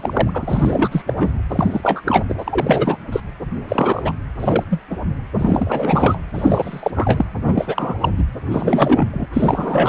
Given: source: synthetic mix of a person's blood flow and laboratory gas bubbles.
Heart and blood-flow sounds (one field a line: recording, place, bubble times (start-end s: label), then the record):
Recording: Doppler ultrasound of blood flow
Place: precordium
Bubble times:
0.00-1.14 s: bubbles
1.17-1.32 s: bubbles
1.49-2.01 s: bubbles
2.05-2.24 s: bubbles
2.28-2.35 s: bubbles
2.38-2.98 s: bubbles
3.12-3.20 s: bubbles
3.66-4.12 s: bubbles
4.39-4.64 s: bubbles
4.70-4.80 s: bubbles
4.90-4.97 s: bubbles
5.39-6.19 s: bubbles
6.35-6.91 s: bubbles
6.95-7.25 s: bubbles
7.47-7.95 s: bubbles
8.01-8.11 s: bubbles
8.17-8.24 s: bubbles
8.51-9.06 s: bubbles
9.12-9.28 s: bubbles
9.33-9.89 s: bubbles
From the record:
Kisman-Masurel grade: 343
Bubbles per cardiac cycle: rolling drumbeat, 9 or more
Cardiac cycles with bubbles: 100%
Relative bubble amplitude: loud (0.450 to 0.775)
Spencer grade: 3 (all of the cardiac periods contain showers or single bubble signals, but not dominating or overriding the cardiac motion signals)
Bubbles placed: anywhere in the cardiac cycle